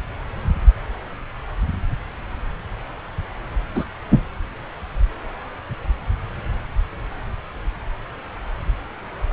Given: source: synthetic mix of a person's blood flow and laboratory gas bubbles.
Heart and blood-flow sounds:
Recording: Doppler ultrasound of blood flow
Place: subclavian vein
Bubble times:
3.75-3.85 s: bubbles
4.09-4.22 s: bubbles
From the record:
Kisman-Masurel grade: 113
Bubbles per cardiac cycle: 1 to 2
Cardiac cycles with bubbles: 1 to 10%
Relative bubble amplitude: loud (0.450 to 0.775)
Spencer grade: 1 (occasional bubble signal discernible with the cardiac motion signal, with majority of cardiac periods free of bubbles)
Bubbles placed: anywhere in the cardiac cycle

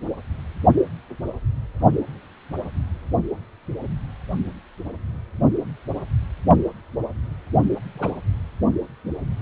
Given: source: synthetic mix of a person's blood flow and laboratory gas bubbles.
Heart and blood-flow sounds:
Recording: Doppler ultrasound of blood flow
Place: precordium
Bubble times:
7.93-8.11 s: bubbles
From the record:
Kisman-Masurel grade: 211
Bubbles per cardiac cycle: several, 3 to 8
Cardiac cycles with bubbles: 1 to 10%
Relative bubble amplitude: barely perceptible (0.100 to 0.250)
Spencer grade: 1 (occasional bubble signal discernible with the cardiac motion signal, with majority of cardiac periods free of bubbles)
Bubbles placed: only in the low amplitude regions of the cardiac cycle

